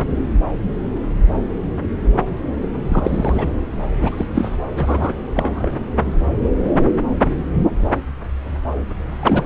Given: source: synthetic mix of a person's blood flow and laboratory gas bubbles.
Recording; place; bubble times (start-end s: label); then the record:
Doppler ultrasound of blood flow; subclavian vein
2.88-3.51 s: bubbles
3.99-4.26 s: bubbles
4.35-4.58 s: bubbles
4.75-5.13 s: bubbles
5.35-5.73 s: bubbles
9.21-9.45 s: bubbles
From the record:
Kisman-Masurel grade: 222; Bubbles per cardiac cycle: several, 3 to 8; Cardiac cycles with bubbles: 10 to 50%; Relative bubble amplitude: moderate (0.250 to 0.450); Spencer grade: 2 (many but less than half of the cardiac periods contain bubble signals, singularly or in groups); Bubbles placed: anywhere in the cardiac cycle